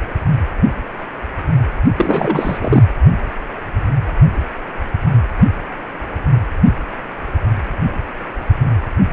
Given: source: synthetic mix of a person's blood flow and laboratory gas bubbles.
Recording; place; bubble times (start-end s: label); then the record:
Doppler ultrasound of blood flow; precordium
1.96-2.83 s: bubbles
From the record:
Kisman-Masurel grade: 213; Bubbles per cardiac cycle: several, 3 to 8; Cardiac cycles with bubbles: 1 to 10%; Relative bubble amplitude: loud (0.450 to 0.775); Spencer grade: 1 (occasional bubble signal discernible with the cardiac motion signal, with majority of cardiac periods free of bubbles); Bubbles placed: anywhere in the cardiac cycle